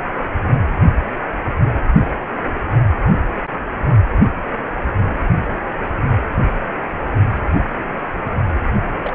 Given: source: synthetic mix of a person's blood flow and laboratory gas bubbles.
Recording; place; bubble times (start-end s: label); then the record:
Doppler ultrasound of blood flow; precordium
9.04-9.13 s: bubbles
From the record:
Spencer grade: 2 (many but less than half of the cardiac periods contain bubble signals, singularly or in groups); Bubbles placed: only in the low amplitude regions of the cardiac cycle